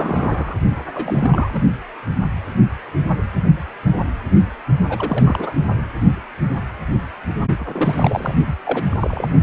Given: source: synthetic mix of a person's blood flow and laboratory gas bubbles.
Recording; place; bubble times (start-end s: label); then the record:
Doppler ultrasound of blood flow; precordium
0.00-0.55 s: bubbles
0.93-1.62 s: bubbles
4.89-5.54 s: bubbles
7.59-8.34 s: bubbles
8.46-8.54 s: bubbles
8.64-8.86 s: bubbles
8.89-9.30 s: bubbles
From the record:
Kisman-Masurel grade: 332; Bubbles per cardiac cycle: rolling drumbeat, 9 or more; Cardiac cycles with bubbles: 50 to 99%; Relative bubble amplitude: moderate (0.250 to 0.450); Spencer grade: 3 (all of the cardiac periods contain showers or single bubble signals, but not dominating or overriding the cardiac motion signals); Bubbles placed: only in the low amplitude regions of the cardiac cycle